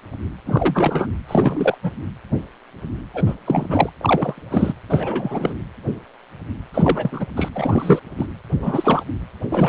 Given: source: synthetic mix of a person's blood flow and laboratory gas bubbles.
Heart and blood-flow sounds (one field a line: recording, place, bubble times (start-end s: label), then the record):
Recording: Doppler ultrasound of blood flow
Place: precordium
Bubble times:
0.46-1.11 s: bubbles
1.28-1.78 s: bubbles
1.83-1.92 s: bubbles
3.14-3.35 s: bubbles
3.45-3.90 s: bubbles
4.01-4.42 s: bubbles
4.50-4.74 s: bubbles
4.89-5.54 s: bubbles
6.74-7.26 s: bubbles
7.36-7.49 s: bubbles
7.55-8.00 s: bubbles
8.17-8.26 s: bubbles
8.51-9.03 s: bubbles
9.50-9.69 s: bubbles
From the record:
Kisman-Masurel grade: 232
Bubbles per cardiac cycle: several, 3 to 8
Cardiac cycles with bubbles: 50 to 99%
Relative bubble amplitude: moderate (0.250 to 0.450)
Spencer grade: 3 (all of the cardiac periods contain showers or single bubble signals, but not dominating or overriding the cardiac motion signals)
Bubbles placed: anywhere in the cardiac cycle